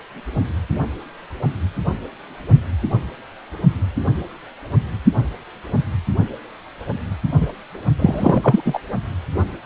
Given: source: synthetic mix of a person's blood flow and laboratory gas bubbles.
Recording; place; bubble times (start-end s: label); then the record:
Doppler ultrasound of blood flow; precordium
7.41-7.51 s: bubbles
7.99-8.62 s: bubbles
8.65-8.79 s: bubbles
From the record:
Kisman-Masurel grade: 213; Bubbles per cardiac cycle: several, 3 to 8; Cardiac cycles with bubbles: 1 to 10%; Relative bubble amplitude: loud (0.450 to 0.775); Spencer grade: 1 (occasional bubble signal discernible with the cardiac motion signal, with majority of cardiac periods free of bubbles); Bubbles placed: only in the low amplitude regions of the cardiac cycle